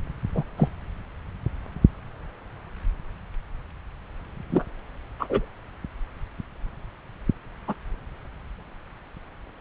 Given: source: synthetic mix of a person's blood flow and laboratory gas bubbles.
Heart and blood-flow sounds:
Doppler ultrasound of blood flow; subclavian vein
0.34-0.43 s: bubbles
0.56-0.71 s: bubbles
4.50-4.65 s: bubbles
5.19-5.46 s: bubbles
7.67-7.75 s: bubbles
From the record:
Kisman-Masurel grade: 123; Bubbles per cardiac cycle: 1 to 2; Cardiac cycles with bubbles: 10 to 50%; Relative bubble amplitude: loud (0.450 to 0.775); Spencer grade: 2 (many but less than half of the cardiac periods contain bubble signals, singularly or in groups); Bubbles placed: anywhere in the cardiac cycle

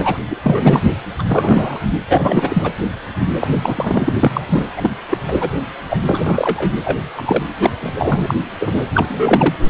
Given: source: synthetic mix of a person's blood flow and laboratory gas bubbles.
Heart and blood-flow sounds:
Doppler ultrasound of blood flow; precordium
0.00-0.17 s: bubbles
0.29-0.80 s: bubbles
1.19-1.23 s: bubbles
1.29-1.79 s: bubbles
2.09-2.73 s: bubbles
3.40-3.48 s: bubbles
3.62-4.12 s: bubbles
4.21-4.42 s: bubbles
4.49-4.67 s: bubbles
4.76-4.90 s: bubbles
5.10-5.17 s: bubbles
5.28-5.50 s: bubbles
5.88-5.97 s: bubbles
6.07-6.72 s: bubbles
6.83-6.99 s: bubbles
7.16-7.43 s: bubbles
7.46-7.71 s: bubbles
7.81-8.35 s: bubbles
8.59-8.83 s: bubbles
8.93-9.05 s: bubbles
9.08-9.55 s: bubbles
From the record:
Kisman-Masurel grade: 343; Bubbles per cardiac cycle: rolling drumbeat, 9 or more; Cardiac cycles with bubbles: 100%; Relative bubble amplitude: loud (0.450 to 0.775); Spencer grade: 3 (all of the cardiac periods contain showers or single bubble signals, but not dominating or overriding the cardiac motion signals); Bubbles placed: anywhere in the cardiac cycle

